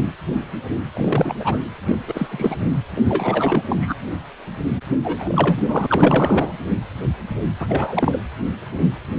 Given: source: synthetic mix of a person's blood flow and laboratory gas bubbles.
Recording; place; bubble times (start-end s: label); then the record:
Doppler ultrasound of blood flow; precordium
0.94-1.36 s: bubbles
1.40-1.58 s: bubbles
1.88-1.97 s: bubbles
2.07-2.27 s: bubbles
2.30-2.56 s: bubbles
2.96-3.01 s: bubbles
3.05-3.65 s: bubbles
3.67-3.96 s: bubbles
5.04-5.62 s: bubbles
5.68-6.53 s: bubbles
7.59-8.17 s: bubbles
From the record:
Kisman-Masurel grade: 333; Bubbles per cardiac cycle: rolling drumbeat, 9 or more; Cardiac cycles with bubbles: 50 to 99%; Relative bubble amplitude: loud (0.450 to 0.775); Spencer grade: 3 (all of the cardiac periods contain showers or single bubble signals, but not dominating or overriding the cardiac motion signals); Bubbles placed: anywhere in the cardiac cycle